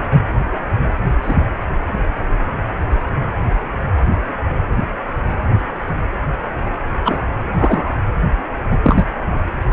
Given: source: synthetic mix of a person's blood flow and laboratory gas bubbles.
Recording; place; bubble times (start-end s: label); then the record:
Doppler ultrasound of blood flow; precordium
1.23-1.35 s: bubbles
7.04-7.19 s: bubbles
7.58-7.96 s: bubbles
8.70-8.78 s: bubbles
8.83-9.05 s: bubbles
9.70-9.73 s: bubbles
From the record:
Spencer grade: 2 (many but less than half of the cardiac periods contain bubble signals, singularly or in groups); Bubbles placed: anywhere in the cardiac cycle